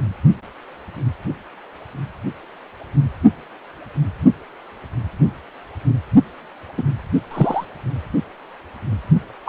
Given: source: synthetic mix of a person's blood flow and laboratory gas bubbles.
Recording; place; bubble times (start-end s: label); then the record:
Doppler ultrasound of blood flow; precordium
6.77-6.83 s: bubbles
7.30-7.65 s: bubbles
9.46-9.49 s: bubbles
From the record:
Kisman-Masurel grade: 123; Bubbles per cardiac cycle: 1 to 2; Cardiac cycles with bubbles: 10 to 50%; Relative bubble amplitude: loud (0.450 to 0.775); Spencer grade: 2 (many but less than half of the cardiac periods contain bubble signals, singularly or in groups); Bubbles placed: only in the low amplitude regions of the cardiac cycle